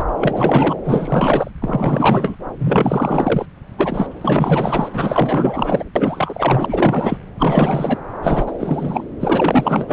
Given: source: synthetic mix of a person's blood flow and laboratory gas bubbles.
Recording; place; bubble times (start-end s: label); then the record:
Doppler ultrasound of blood flow; subclavian vein
0.00-0.04 s: bubbles
0.20-0.76 s: bubbles
0.84-1.51 s: bubbles
1.61-2.36 s: bubbles
2.58-3.46 s: bubbles
3.78-4.07 s: bubbles
4.21-4.88 s: bubbles
4.92-5.83 s: bubbles
5.96-7.18 s: bubbles
7.38-8.00 s: bubbles
8.23-8.53 s: bubbles
8.59-9.04 s: bubbles
9.19-9.93 s: bubbles
From the record:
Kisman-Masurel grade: 444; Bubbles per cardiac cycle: continuous sound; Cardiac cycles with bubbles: 100%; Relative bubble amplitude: maximal (0.775 to 0.999); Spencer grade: 4 (maximum detectable bubble signal sounding continuously throughout systole and diastole of every cardiac period, and overriding the amplitude of the normal cardiac signals); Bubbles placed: anywhere in the cardiac cycle